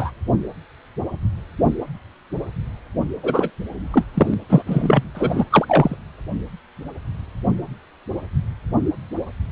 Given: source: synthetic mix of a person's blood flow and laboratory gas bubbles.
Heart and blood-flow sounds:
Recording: Doppler ultrasound of blood flow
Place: precordium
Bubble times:
0.00-0.11 s: bubbles
3.23-3.50 s: bubbles
3.93-4.04 s: bubbles
4.14-4.34 s: bubbles
4.49-4.62 s: bubbles
4.66-5.03 s: bubbles
5.14-5.45 s: bubbles
5.50-5.96 s: bubbles
From the record:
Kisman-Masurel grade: 233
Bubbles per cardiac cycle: several, 3 to 8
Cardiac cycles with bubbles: 50 to 99%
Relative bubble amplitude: loud (0.450 to 0.775)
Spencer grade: 3 (all of the cardiac periods contain showers or single bubble signals, but not dominating or overriding the cardiac motion signals)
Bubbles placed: anywhere in the cardiac cycle

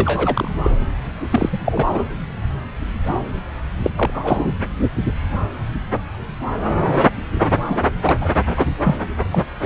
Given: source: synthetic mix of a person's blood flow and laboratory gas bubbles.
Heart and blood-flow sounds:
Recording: Doppler ultrasound of blood flow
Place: subclavian vein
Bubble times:
0.00-0.51 s: bubbles
0.64-0.71 s: bubbles
1.30-1.50 s: bubbles
1.52-1.88 s: bubbles
1.91-2.03 s: bubbles
3.83-3.90 s: bubbles
3.96-4.52 s: bubbles
7.68-7.79 s: bubbles
8.04-8.16 s: bubbles
8.21-8.30 s: bubbles
8.46-8.53 s: bubbles
8.57-8.67 s: bubbles
8.83-8.95 s: bubbles
9.31-9.45 s: bubbles
9.62-9.66 s: bubbles
From the record:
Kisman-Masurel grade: 232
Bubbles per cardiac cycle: several, 3 to 8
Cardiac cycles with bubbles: 50 to 99%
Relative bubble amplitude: moderate (0.250 to 0.450)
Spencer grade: 3 (all of the cardiac periods contain showers or single bubble signals, but not dominating or overriding the cardiac motion signals)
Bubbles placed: anywhere in the cardiac cycle

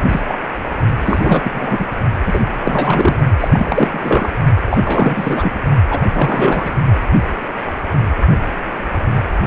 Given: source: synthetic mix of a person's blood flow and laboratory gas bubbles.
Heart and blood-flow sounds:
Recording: Doppler ultrasound of blood flow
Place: precordium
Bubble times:
0.08-0.21 s: bubbles
0.27-0.39 s: bubbles
1.05-1.88 s: bubbles
2.25-2.40 s: bubbles
2.64-3.18 s: bubbles
3.40-4.29 s: bubbles
4.70-5.52 s: bubbles
5.89-6.02 s: bubbles
6.14-6.73 s: bubbles
From the record:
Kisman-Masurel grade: 333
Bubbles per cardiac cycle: rolling drumbeat, 9 or more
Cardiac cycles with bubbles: 50 to 99%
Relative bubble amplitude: loud (0.450 to 0.775)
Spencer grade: 3 (all of the cardiac periods contain showers or single bubble signals, but not dominating or overriding the cardiac motion signals)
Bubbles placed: only in the low amplitude regions of the cardiac cycle

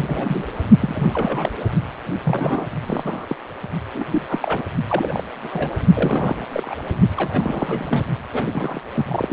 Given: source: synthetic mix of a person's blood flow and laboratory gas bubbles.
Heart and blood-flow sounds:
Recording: Doppler ultrasound of blood flow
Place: precordium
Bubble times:
0.00-0.47 s: bubbles
0.79-1.10 s: bubbles
1.13-1.51 s: bubbles
1.59-1.64 s: bubbles
2.24-2.67 s: bubbles
2.85-3.26 s: bubbles
3.29-3.35 s: bubbles
3.93-4.04 s: bubbles
4.10-4.62 s: bubbles
4.88-5.23 s: bubbles
5.43-5.72 s: bubbles
5.94-6.44 s: bubbles
6.52-6.75 s: bubbles
7.17-8.05 s: bubbles
8.32-8.81 s: bubbles
8.93-9.33 s: bubbles
From the record:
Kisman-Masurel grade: 342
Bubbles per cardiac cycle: rolling drumbeat, 9 or more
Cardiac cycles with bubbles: 100%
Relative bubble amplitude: moderate (0.250 to 0.450)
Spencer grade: 3 (all of the cardiac periods contain showers or single bubble signals, but not dominating or overriding the cardiac motion signals)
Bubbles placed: only in the low amplitude regions of the cardiac cycle

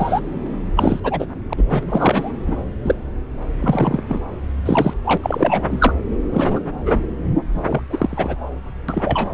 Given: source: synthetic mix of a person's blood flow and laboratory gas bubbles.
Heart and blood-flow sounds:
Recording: Doppler ultrasound of blood flow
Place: subclavian vein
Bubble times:
0.00-0.20 s: bubbles
0.76-1.00 s: bubbles
1.03-1.27 s: bubbles
1.50-1.53 s: bubbles
1.57-1.82 s: bubbles
1.89-2.31 s: bubbles
2.46-2.63 s: bubbles
2.82-2.95 s: bubbles
3.60-4.03 s: bubbles
4.08-4.21 s: bubbles
4.65-4.94 s: bubbles
5.05-5.17 s: bubbles
5.22-5.64 s: bubbles
5.67-5.93 s: bubbles
6.33-6.59 s: bubbles
6.85-7.01 s: bubbles
7.54-7.82 s: bubbles
7.89-8.39 s: bubbles
8.88-9.30 s: bubbles
From the record:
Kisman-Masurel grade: 243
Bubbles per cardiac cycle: several, 3 to 8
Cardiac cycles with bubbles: 100%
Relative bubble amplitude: loud (0.450 to 0.775)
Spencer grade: 3 (all of the cardiac periods contain showers or single bubble signals, but not dominating or overriding the cardiac motion signals)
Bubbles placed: anywhere in the cardiac cycle

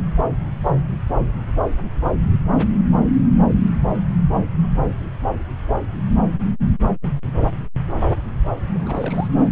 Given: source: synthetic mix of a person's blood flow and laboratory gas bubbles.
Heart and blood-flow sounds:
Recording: Doppler ultrasound of blood flow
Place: subclavian vein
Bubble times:
8.74-9.29 s: bubbles
From the record:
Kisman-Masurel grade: 211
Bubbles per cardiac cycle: several, 3 to 8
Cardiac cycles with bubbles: 1 to 10%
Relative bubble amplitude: barely perceptible (0.100 to 0.250)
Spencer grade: 1 (occasional bubble signal discernible with the cardiac motion signal, with majority of cardiac periods free of bubbles)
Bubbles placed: anywhere in the cardiac cycle

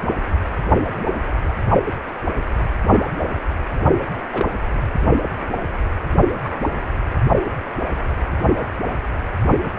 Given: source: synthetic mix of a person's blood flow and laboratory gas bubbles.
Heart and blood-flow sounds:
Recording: Doppler ultrasound of blood flow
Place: precordium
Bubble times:
4.33-4.47 s: bubbles
6.45-6.49 s: bubbles
From the record:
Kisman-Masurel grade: 122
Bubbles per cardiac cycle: 1 to 2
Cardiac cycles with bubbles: 10 to 50%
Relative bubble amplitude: moderate (0.250 to 0.450)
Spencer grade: 2 (many but less than half of the cardiac periods contain bubble signals, singularly or in groups)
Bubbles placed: anywhere in the cardiac cycle

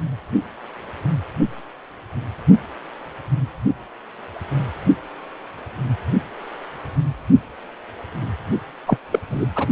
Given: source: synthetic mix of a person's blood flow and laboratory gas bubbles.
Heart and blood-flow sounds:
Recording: Doppler ultrasound of blood flow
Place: precordium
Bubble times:
8.86-8.98 s: bubbles
9.10-9.19 s: bubbles
9.30-9.46 s: bubbles
9.55-9.67 s: bubbles
From the record:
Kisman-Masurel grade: 213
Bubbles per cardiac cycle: several, 3 to 8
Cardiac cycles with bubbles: 1 to 10%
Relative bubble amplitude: loud (0.450 to 0.775)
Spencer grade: 1 (occasional bubble signal discernible with the cardiac motion signal, with majority of cardiac periods free of bubbles)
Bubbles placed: only in the low amplitude regions of the cardiac cycle

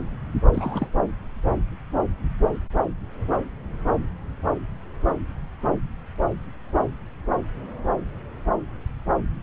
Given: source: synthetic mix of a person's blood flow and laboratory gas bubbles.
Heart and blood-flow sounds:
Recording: Doppler ultrasound of blood flow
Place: subclavian vein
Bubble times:
0.53-0.88 s: bubbles
From the record:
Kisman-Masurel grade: 212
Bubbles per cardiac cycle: several, 3 to 8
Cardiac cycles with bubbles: 1 to 10%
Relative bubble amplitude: moderate (0.250 to 0.450)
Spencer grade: 1 (occasional bubble signal discernible with the cardiac motion signal, with majority of cardiac periods free of bubbles)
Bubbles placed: anywhere in the cardiac cycle

